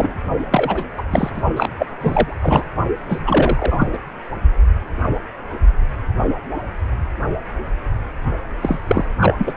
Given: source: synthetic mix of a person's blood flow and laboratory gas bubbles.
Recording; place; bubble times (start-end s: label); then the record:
Doppler ultrasound of blood flow; precordium
0.00-0.12 s: bubbles
0.51-0.84 s: bubbles
0.97-1.02 s: bubbles
1.10-1.30 s: bubbles
1.34-1.42 s: bubbles
1.56-1.72 s: bubbles
1.78-1.87 s: bubbles
2.01-2.36 s: bubbles
2.41-2.64 s: bubbles
3.09-3.23 s: bubbles
3.25-3.86 s: bubbles
3.93-3.98 s: bubbles
8.61-8.81 s: bubbles
8.88-9.05 s: bubbles
9.21-9.34 s: bubbles
9.38-9.53 s: bubbles
From the record:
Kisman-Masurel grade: 333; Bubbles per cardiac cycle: rolling drumbeat, 9 or more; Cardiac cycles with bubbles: 50 to 99%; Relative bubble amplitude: loud (0.450 to 0.775); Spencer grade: 3 (all of the cardiac periods contain showers or single bubble signals, but not dominating or overriding the cardiac motion signals); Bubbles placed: only in the low amplitude regions of the cardiac cycle